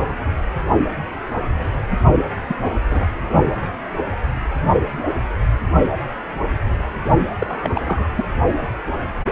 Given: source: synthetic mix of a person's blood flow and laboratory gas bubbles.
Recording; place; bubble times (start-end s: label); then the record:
Doppler ultrasound of blood flow; precordium
2.48-2.55 s: bubbles
2.62-2.75 s: bubbles
2.89-3.08 s: bubbles
7.38-8.09 s: bubbles
8.15-8.25 s: bubbles
From the record:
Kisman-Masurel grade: 222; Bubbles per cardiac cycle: several, 3 to 8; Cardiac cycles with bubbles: 10 to 50%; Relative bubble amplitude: moderate (0.250 to 0.450); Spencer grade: 2 (many but less than half of the cardiac periods contain bubble signals, singularly or in groups); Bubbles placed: only in the low amplitude regions of the cardiac cycle